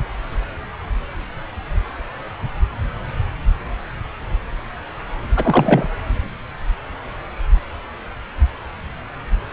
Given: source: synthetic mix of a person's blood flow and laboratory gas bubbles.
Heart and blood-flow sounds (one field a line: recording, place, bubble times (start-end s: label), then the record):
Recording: Doppler ultrasound of blood flow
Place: subclavian vein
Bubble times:
5.36-5.88 s: bubbles
From the record:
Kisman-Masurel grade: 213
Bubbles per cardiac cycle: several, 3 to 8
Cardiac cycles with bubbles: 1 to 10%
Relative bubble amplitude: loud (0.450 to 0.775)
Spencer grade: 1 (occasional bubble signal discernible with the cardiac motion signal, with majority of cardiac periods free of bubbles)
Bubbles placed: anywhere in the cardiac cycle